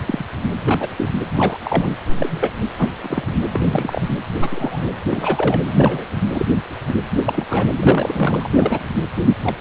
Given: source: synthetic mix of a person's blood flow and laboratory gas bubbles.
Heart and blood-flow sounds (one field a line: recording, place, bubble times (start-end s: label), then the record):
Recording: Doppler ultrasound of blood flow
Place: precordium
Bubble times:
0.06-0.26 s: bubbles
0.64-0.88 s: bubbles
0.96-1.10 s: bubbles
1.33-1.57 s: bubbles
1.63-1.96 s: bubbles
2.17-2.52 s: bubbles
2.62-2.69 s: bubbles
2.78-2.90 s: bubbles
3.02-3.27 s: bubbles
3.50-4.08 s: bubbles
4.39-4.90 s: bubbles
5.09-5.61 s: bubbles
5.66-6.07 s: bubbles
6.35-6.46 s: bubbles
6.86-6.95 s: bubbles
7.11-7.19 s: bubbles
7.25-7.45 s: bubbles
7.50-7.67 s: bubbles
7.76-8.50 s: bubbles
8.54-8.91 s: bubbles
9.43-9.55 s: bubbles
From the record:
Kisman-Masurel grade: 242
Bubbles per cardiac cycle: several, 3 to 8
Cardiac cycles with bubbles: 100%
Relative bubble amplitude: moderate (0.250 to 0.450)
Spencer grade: 3 (all of the cardiac periods contain showers or single bubble signals, but not dominating or overriding the cardiac motion signals)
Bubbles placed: anywhere in the cardiac cycle